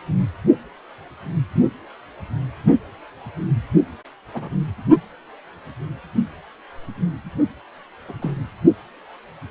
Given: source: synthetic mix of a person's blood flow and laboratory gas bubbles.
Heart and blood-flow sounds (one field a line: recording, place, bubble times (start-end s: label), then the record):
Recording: Doppler ultrasound of blood flow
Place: precordium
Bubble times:
4.33-4.55 s: bubbles
8.09-8.13 s: bubbles
8.22-8.32 s: bubbles
From the record:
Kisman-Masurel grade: 121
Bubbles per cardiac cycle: 1 to 2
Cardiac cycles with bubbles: 10 to 50%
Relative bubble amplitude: barely perceptible (0.100 to 0.250)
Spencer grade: 2 (many but less than half of the cardiac periods contain bubble signals, singularly or in groups)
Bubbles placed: only in the low amplitude regions of the cardiac cycle